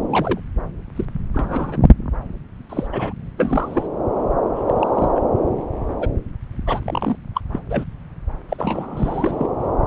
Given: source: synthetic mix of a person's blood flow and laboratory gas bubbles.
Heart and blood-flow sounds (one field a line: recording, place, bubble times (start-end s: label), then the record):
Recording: Doppler ultrasound of blood flow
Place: subclavian vein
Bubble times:
0.10-0.40 s: bubbles
0.95-1.05 s: bubbles
1.34-1.77 s: bubbles
1.82-1.89 s: bubbles
2.70-2.87 s: bubbles
2.93-3.13 s: bubbles
3.38-3.87 s: bubbles
4.55-4.63 s: bubbles
4.67-5.08 s: bubbles
5.15-5.22 s: bubbles
6.00-6.08 s: bubbles
6.66-7.17 s: bubbles
7.34-7.41 s: bubbles
7.52-7.59 s: bubbles
7.68-7.84 s: bubbles
8.48-9.47 s: bubbles
From the record:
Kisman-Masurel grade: 242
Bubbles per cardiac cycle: several, 3 to 8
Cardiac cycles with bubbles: 100%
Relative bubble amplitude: moderate (0.250 to 0.450)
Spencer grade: 3 (all of the cardiac periods contain showers or single bubble signals, but not dominating or overriding the cardiac motion signals)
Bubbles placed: anywhere in the cardiac cycle